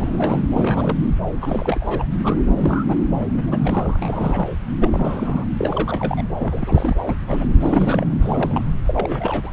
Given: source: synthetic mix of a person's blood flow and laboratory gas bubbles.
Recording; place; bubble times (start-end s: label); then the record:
Doppler ultrasound of blood flow; subclavian vein
0.00-0.42 s: bubbles
0.54-0.97 s: bubbles
1.41-2.06 s: bubbles
2.23-2.40 s: bubbles
2.57-2.84 s: bubbles
2.88-2.96 s: bubbles
3.19-3.25 s: bubbles
3.32-4.50 s: bubbles
4.75-5.46 s: bubbles
5.57-6.23 s: bubbles
6.38-6.96 s: bubbles
7.06-7.16 s: bubbles
7.27-7.48 s: bubbles
7.61-8.05 s: bubbles
8.20-8.66 s: bubbles
8.87-9.50 s: bubbles
From the record:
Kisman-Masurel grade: 342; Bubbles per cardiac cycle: rolling drumbeat, 9 or more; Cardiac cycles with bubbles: 100%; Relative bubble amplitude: moderate (0.250 to 0.450); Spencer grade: 3 (all of the cardiac periods contain showers or single bubble signals, but not dominating or overriding the cardiac motion signals); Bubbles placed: anywhere in the cardiac cycle